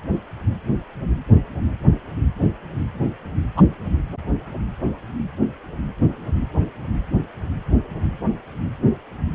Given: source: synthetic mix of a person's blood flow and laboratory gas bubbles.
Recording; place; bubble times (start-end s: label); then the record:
Doppler ultrasound of blood flow; precordium
3.56-3.62 s: bubbles
From the record:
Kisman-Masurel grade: 113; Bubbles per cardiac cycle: 1 to 2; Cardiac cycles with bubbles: 1 to 10%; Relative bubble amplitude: loud (0.450 to 0.775); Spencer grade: 1 (occasional bubble signal discernible with the cardiac motion signal, with majority of cardiac periods free of bubbles); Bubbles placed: anywhere in the cardiac cycle